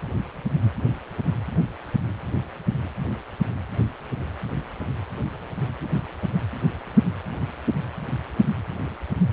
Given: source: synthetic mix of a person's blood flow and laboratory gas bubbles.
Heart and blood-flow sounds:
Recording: Doppler ultrasound of blood flow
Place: precordium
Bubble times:
no bubbles
From the record:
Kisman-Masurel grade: 000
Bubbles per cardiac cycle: 0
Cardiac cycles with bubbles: 0%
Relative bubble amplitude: no bubbles discernible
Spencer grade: 0 (complete lack of bubble signals)

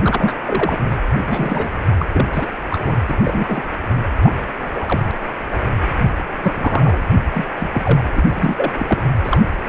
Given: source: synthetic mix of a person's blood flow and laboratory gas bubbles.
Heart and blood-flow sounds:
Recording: Doppler ultrasound of blood flow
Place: precordium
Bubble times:
0.03-0.34 s: bubbles
0.46-0.78 s: bubbles
0.90-0.96 s: bubbles
1.27-1.69 s: bubbles
1.98-2.07 s: bubbles
2.13-2.27 s: bubbles
2.33-2.47 s: bubbles
2.70-2.96 s: bubbles
3.08-3.17 s: bubbles
3.24-3.63 s: bubbles
4.23-4.32 s: bubbles
4.75-5.00 s: bubbles
5.52-5.57 s: bubbles
6.43-6.53 s: bubbles
6.56-7.00 s: bubbles
7.11-7.13 s: bubbles
7.34-7.46 s: bubbles
7.55-7.68 s: bubbles
7.74-8.04 s: bubbles
8.15-8.22 s: bubbles
8.34-8.72 s: bubbles
8.78-9.01 s: bubbles
9.23-9.40 s: bubbles
From the record:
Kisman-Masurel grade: 242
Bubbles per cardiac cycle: several, 3 to 8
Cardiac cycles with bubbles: 100%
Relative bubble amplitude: moderate (0.250 to 0.450)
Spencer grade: 3 (all of the cardiac periods contain showers or single bubble signals, but not dominating or overriding the cardiac motion signals)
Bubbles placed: anywhere in the cardiac cycle

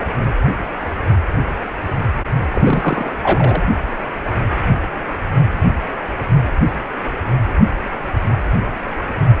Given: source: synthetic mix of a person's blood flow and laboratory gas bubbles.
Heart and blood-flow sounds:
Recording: Doppler ultrasound of blood flow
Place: precordium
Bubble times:
2.48-3.12 s: bubbles
3.22-3.65 s: bubbles
From the record:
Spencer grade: 2 (many but less than half of the cardiac periods contain bubble signals, singularly or in groups)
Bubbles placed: anywhere in the cardiac cycle

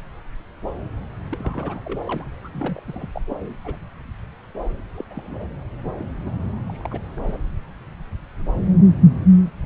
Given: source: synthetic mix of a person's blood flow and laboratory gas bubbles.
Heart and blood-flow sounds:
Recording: Doppler ultrasound of blood flow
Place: subclavian vein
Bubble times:
1.31-2.01 s: bubbles
2.06-2.24 s: bubbles
2.44-2.48 s: bubbles
2.53-2.80 s: bubbles
2.88-3.21 s: bubbles
3.29-3.36 s: bubbles
3.42-3.56 s: bubbles
3.65-3.76 s: bubbles
4.95-5.04 s: bubbles
5.11-5.46 s: bubbles
5.85-5.91 s: bubbles
5.99-6.05 s: bubbles
6.26-6.31 s: bubbles
6.68-6.99 s: bubbles
7.16-7.37 s: bubbles
From the record:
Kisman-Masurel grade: 221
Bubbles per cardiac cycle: several, 3 to 8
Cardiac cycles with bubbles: 10 to 50%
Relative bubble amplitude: barely perceptible (0.100 to 0.250)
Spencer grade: 2 (many but less than half of the cardiac periods contain bubble signals, singularly or in groups)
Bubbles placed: anywhere in the cardiac cycle

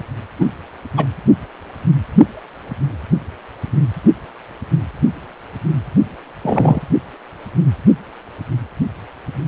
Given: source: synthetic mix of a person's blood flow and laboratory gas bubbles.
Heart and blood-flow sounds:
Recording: Doppler ultrasound of blood flow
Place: precordium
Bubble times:
0.39-0.46 s: bubbles
0.96-1.05 s: bubbles
6.42-6.81 s: bubbles
From the record:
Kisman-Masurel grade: 123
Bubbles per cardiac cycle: 1 to 2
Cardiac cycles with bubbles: 10 to 50%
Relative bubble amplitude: loud (0.450 to 0.775)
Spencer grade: 2 (many but less than half of the cardiac periods contain bubble signals, singularly or in groups)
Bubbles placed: only in the low amplitude regions of the cardiac cycle

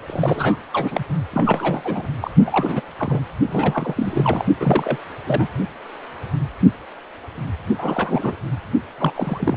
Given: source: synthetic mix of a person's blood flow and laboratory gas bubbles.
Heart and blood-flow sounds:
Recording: Doppler ultrasound of blood flow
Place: precordium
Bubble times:
0.06-0.56 s: bubbles
0.73-1.05 s: bubbles
1.32-2.06 s: bubbles
2.21-2.31 s: bubbles
2.45-2.81 s: bubbles
2.98-3.21 s: bubbles
3.47-4.46 s: bubbles
4.60-4.97 s: bubbles
5.26-5.48 s: bubbles
7.78-8.36 s: bubbles
8.98-9.12 s: bubbles
9.15-9.57 s: bubbles
From the record:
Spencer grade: 3 (all of the cardiac periods contain showers or single bubble signals, but not dominating or overriding the cardiac motion signals)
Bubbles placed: only in the low amplitude regions of the cardiac cycle

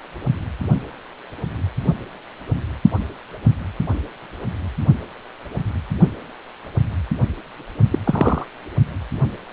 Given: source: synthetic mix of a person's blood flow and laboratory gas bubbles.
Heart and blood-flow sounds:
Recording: Doppler ultrasound of blood flow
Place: precordium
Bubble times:
7.91-7.98 s: bubbles
8.04-8.45 s: bubbles
From the record:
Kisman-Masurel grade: 113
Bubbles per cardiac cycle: 1 to 2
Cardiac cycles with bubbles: 1 to 10%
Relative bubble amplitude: loud (0.450 to 0.775)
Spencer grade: 1 (occasional bubble signal discernible with the cardiac motion signal, with majority of cardiac periods free of bubbles)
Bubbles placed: only in the low amplitude regions of the cardiac cycle

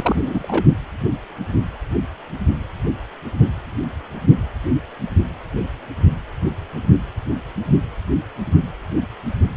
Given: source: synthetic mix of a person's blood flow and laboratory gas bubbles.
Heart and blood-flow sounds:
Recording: Doppler ultrasound of blood flow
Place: precordium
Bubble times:
0.00-0.65 s: bubbles
From the record:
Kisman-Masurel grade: 212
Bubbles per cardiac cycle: several, 3 to 8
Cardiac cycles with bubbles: 1 to 10%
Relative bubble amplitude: moderate (0.250 to 0.450)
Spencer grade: 1 (occasional bubble signal discernible with the cardiac motion signal, with majority of cardiac periods free of bubbles)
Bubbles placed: only in the low amplitude regions of the cardiac cycle

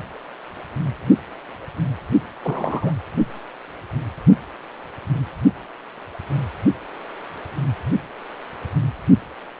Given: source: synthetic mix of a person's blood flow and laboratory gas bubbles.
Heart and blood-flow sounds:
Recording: Doppler ultrasound of blood flow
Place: precordium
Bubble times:
2.43-2.92 s: bubbles
From the record:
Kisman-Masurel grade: 112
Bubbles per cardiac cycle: 1 to 2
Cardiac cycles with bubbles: 1 to 10%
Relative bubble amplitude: moderate (0.250 to 0.450)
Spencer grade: 1 (occasional bubble signal discernible with the cardiac motion signal, with majority of cardiac periods free of bubbles)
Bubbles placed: only in the low amplitude regions of the cardiac cycle

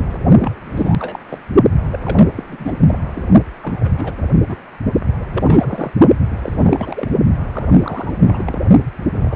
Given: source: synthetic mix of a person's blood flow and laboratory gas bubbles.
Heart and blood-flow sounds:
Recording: Doppler ultrasound of blood flow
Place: precordium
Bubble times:
0.00-0.18 s: bubbles
0.40-0.53 s: bubbles
0.65-1.19 s: bubbles
1.29-1.38 s: bubbles
1.92-1.99 s: bubbles
2.04-2.25 s: bubbles
2.36-2.43 s: bubbles
2.49-2.79 s: bubbles
2.86-3.00 s: bubbles
3.13-3.22 s: bubbles
3.62-3.92 s: bubbles
3.98-4.12 s: bubbles
4.48-4.57 s: bubbles
5.20-5.91 s: bubbles
6.37-7.09 s: bubbles
7.50-8.14 s: bubbles
8.21-8.61 s: bubbles
9.14-9.36 s: bubbles
From the record:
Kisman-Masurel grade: 342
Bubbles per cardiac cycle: rolling drumbeat, 9 or more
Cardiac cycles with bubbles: 100%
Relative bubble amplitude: moderate (0.250 to 0.450)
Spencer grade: 3 (all of the cardiac periods contain showers or single bubble signals, but not dominating or overriding the cardiac motion signals)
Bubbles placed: only in the low amplitude regions of the cardiac cycle

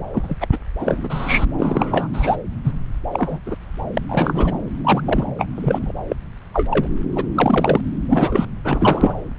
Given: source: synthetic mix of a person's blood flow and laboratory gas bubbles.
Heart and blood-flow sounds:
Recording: Doppler ultrasound of blood flow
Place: subclavian vein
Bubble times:
0.13-0.36 s: bubbles
0.40-0.47 s: bubbles
0.52-0.58 s: bubbles
0.79-1.45 s: bubbles
1.57-2.08 s: bubbles
2.13-2.36 s: bubbles
2.64-2.72 s: bubbles
3.12-3.39 s: bubbles
3.46-3.56 s: bubbles
3.94-4.01 s: bubbles
4.09-4.58 s: bubbles
4.84-5.02 s: bubbles
5.05-5.25 s: bubbles
5.38-5.46 s: bubbles
5.55-5.92 s: bubbles
6.09-6.16 s: bubbles
6.53-6.88 s: bubbles
7.15-7.24 s: bubbles
7.34-7.81 s: bubbles
8.10-8.46 s: bubbles
8.65-9.24 s: bubbles
From the record:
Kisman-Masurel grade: 243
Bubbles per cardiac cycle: several, 3 to 8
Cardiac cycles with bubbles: 100%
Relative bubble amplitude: loud (0.450 to 0.775)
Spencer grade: 3 (all of the cardiac periods contain showers or single bubble signals, but not dominating or overriding the cardiac motion signals)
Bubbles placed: anywhere in the cardiac cycle

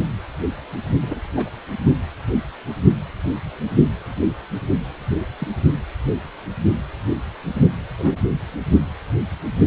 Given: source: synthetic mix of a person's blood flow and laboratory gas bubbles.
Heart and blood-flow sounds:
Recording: Doppler ultrasound of blood flow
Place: precordium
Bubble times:
1.00-1.21 s: bubbles
1.32-1.50 s: bubbles
5.39-5.48 s: bubbles
7.98-8.23 s: bubbles
From the record:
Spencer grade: 2 (many but less than half of the cardiac periods contain bubble signals, singularly or in groups)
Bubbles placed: only in the low amplitude regions of the cardiac cycle

